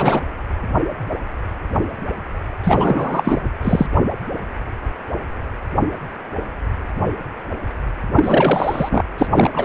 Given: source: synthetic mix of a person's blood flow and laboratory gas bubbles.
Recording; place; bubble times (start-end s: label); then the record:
Doppler ultrasound of blood flow; precordium
0.00-0.21 s: bubbles
2.64-3.42 s: bubbles
3.64-3.86 s: bubbles
8.15-9.04 s: bubbles
9.17-9.65 s: bubbles
From the record:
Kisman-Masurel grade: 333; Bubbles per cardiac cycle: rolling drumbeat, 9 or more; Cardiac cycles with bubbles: 50 to 99%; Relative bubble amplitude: loud (0.450 to 0.775); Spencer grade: 3 (all of the cardiac periods contain showers or single bubble signals, but not dominating or overriding the cardiac motion signals); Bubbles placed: anywhere in the cardiac cycle